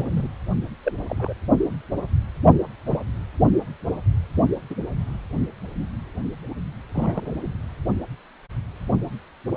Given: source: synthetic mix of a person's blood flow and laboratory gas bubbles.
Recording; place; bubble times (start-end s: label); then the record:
Doppler ultrasound of blood flow; precordium
0.00-0.28 s: bubbles
0.83-0.92 s: bubbles
1.09-1.33 s: bubbles
2.85-2.99 s: bubbles
4.70-4.75 s: bubbles
6.94-7.35 s: bubbles
7.41-7.53 s: bubbles
From the record:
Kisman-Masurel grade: 121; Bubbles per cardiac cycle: 1 to 2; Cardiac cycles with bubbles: 10 to 50%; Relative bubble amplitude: barely perceptible (0.100 to 0.250); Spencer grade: 2 (many but less than half of the cardiac periods contain bubble signals, singularly or in groups); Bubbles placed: only in the low amplitude regions of the cardiac cycle